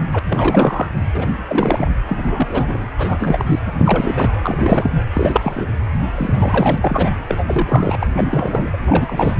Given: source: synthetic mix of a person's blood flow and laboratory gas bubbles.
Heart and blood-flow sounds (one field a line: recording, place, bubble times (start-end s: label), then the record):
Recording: Doppler ultrasound of blood flow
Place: precordium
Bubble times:
0.00-0.07 s: bubbles
0.12-0.19 s: bubbles
0.28-0.87 s: bubbles
1.14-1.90 s: bubbles
2.08-2.87 s: bubbles
2.97-3.59 s: bubbles
3.66-3.71 s: bubbles
3.78-4.37 s: bubbles
4.43-4.90 s: bubbles
5.14-5.68 s: bubbles
6.15-7.10 s: bubbles
7.28-8.06 s: bubbles
8.13-8.78 s: bubbles
8.86-9.36 s: bubbles
From the record:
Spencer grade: 3 (all of the cardiac periods contain showers or single bubble signals, but not dominating or overriding the cardiac motion signals)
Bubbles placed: anywhere in the cardiac cycle